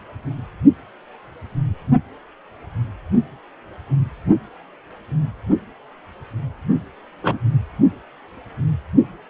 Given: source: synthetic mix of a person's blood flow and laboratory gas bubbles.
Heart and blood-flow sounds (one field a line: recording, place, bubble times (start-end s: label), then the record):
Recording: Doppler ultrasound of blood flow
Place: precordium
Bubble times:
7.22-7.38 s: bubbles
From the record:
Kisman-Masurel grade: 123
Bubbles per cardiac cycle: 1 to 2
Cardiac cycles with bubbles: 10 to 50%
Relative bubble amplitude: loud (0.450 to 0.775)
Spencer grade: 2 (many but less than half of the cardiac periods contain bubble signals, singularly or in groups)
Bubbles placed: only in the low amplitude regions of the cardiac cycle